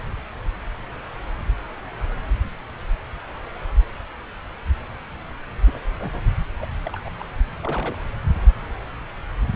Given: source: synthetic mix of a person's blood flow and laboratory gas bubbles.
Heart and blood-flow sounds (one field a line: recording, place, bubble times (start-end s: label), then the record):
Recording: Doppler ultrasound of blood flow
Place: subclavian vein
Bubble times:
5.66-5.79 s: bubbles
6.00-6.33 s: bubbles
6.58-6.66 s: bubbles
6.85-7.10 s: bubbles
7.20-7.24 s: bubbles
7.62-7.98 s: bubbles
From the record:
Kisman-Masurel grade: 221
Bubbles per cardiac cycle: several, 3 to 8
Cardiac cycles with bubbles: 10 to 50%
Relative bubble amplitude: barely perceptible (0.100 to 0.250)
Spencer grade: 2 (many but less than half of the cardiac periods contain bubble signals, singularly or in groups)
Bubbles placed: anywhere in the cardiac cycle